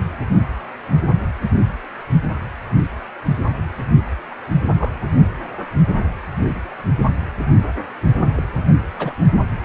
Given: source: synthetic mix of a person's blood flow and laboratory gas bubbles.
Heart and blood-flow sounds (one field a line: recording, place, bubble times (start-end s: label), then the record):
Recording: Doppler ultrasound of blood flow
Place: precordium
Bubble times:
4.31-4.35 s: bubbles
4.77-4.92 s: bubbles
5.19-5.26 s: bubbles
8.36-8.42 s: bubbles
8.98-9.12 s: bubbles
From the record:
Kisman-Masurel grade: 121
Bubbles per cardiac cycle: 1 to 2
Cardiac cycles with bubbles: 10 to 50%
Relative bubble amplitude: barely perceptible (0.100 to 0.250)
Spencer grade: 2 (many but less than half of the cardiac periods contain bubble signals, singularly or in groups)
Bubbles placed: anywhere in the cardiac cycle